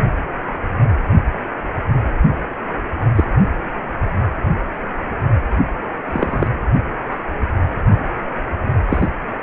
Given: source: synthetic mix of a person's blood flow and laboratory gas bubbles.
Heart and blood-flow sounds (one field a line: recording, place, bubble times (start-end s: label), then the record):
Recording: Doppler ultrasound of blood flow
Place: precordium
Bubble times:
3.15-3.25 s: bubbles
6.11-6.47 s: bubbles
7.11-7.16 s: bubbles
8.88-9.07 s: bubbles
From the record:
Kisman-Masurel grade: 123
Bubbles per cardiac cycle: 1 to 2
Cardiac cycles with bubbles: 10 to 50%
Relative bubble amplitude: loud (0.450 to 0.775)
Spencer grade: 2 (many but less than half of the cardiac periods contain bubble signals, singularly or in groups)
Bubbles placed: anywhere in the cardiac cycle